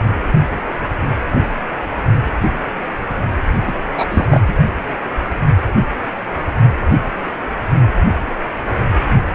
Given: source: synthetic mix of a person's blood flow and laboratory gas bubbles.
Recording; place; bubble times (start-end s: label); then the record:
Doppler ultrasound of blood flow; precordium
3.67-3.72 s: bubbles
3.92-4.27 s: bubbles
4.30-4.41 s: bubbles
4.48-4.55 s: bubbles
From the record:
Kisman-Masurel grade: 213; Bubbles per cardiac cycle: several, 3 to 8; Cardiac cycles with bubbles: 1 to 10%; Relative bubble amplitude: loud (0.450 to 0.775); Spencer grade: 1 (occasional bubble signal discernible with the cardiac motion signal, with majority of cardiac periods free of bubbles); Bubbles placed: anywhere in the cardiac cycle